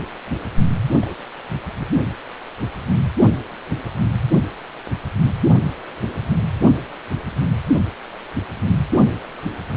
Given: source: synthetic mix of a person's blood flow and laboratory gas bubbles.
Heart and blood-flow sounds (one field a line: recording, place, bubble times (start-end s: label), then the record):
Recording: Doppler ultrasound of blood flow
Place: precordium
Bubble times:
1.01-1.16 s: bubbles
From the record:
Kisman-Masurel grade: 111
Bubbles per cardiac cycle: 1 to 2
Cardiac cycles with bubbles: 1 to 10%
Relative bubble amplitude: barely perceptible (0.100 to 0.250)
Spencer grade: 1 (occasional bubble signal discernible with the cardiac motion signal, with majority of cardiac periods free of bubbles)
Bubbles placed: only in the low amplitude regions of the cardiac cycle